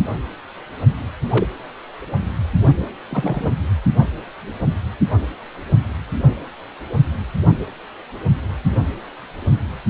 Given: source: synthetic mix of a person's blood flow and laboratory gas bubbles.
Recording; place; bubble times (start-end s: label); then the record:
Doppler ultrasound of blood flow; precordium
1.30-1.47 s: bubbles
3.10-3.50 s: bubbles
From the record:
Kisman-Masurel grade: 122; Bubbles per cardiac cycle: 1 to 2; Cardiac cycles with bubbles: 10 to 50%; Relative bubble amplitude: moderate (0.250 to 0.450); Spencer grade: 2 (many but less than half of the cardiac periods contain bubble signals, singularly or in groups); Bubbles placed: anywhere in the cardiac cycle